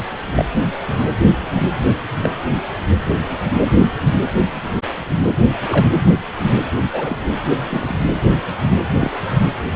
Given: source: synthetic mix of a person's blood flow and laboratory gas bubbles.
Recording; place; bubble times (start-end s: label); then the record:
Doppler ultrasound of blood flow; precordium
0.34-0.46 s: bubbles
0.87-1.04 s: bubbles
2.21-2.29 s: bubbles
5.69-5.88 s: bubbles
6.92-7.17 s: bubbles
7.69-7.96 s: bubbles
8.99-9.11 s: bubbles
From the record:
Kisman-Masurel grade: 122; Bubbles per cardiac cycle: 1 to 2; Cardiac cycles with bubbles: 10 to 50%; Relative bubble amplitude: moderate (0.250 to 0.450); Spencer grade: 2 (many but less than half of the cardiac periods contain bubble signals, singularly or in groups); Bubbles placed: anywhere in the cardiac cycle